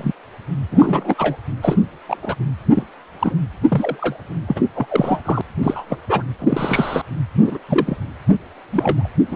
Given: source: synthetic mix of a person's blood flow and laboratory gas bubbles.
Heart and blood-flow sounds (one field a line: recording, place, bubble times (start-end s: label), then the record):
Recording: Doppler ultrasound of blood flow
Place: precordium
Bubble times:
0.00-0.12 s: bubbles
0.71-1.15 s: bubbles
1.18-1.36 s: bubbles
1.61-1.77 s: bubbles
2.08-2.17 s: bubbles
2.23-2.35 s: bubbles
2.74-2.83 s: bubbles
3.19-3.36 s: bubbles
3.69-4.23 s: bubbles
4.48-4.61 s: bubbles
4.75-5.22 s: bubbles
5.25-5.41 s: bubbles
5.62-5.97 s: bubbles
6.08-6.23 s: bubbles
6.38-7.03 s: bubbles
7.37-7.58 s: bubbles
7.67-8.00 s: bubbles
8.71-9.09 s: bubbles
9.31-9.36 s: bubbles
From the record:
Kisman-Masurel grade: 242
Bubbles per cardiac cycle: several, 3 to 8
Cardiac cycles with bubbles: 100%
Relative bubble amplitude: moderate (0.250 to 0.450)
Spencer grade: 3 (all of the cardiac periods contain showers or single bubble signals, but not dominating or overriding the cardiac motion signals)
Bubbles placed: anywhere in the cardiac cycle